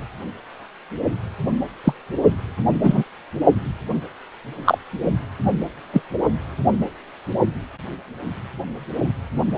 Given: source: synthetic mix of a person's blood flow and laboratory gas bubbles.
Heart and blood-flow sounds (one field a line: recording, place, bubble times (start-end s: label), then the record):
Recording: Doppler ultrasound of blood flow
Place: precordium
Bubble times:
1.84-1.93 s: bubbles
2.83-3.04 s: bubbles
4.64-4.78 s: bubbles
5.92-6.01 s: bubbles
From the record:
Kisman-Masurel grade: 123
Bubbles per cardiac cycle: 1 to 2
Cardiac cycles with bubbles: 10 to 50%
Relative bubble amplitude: loud (0.450 to 0.775)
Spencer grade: 2 (many but less than half of the cardiac periods contain bubble signals, singularly or in groups)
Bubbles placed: only in the low amplitude regions of the cardiac cycle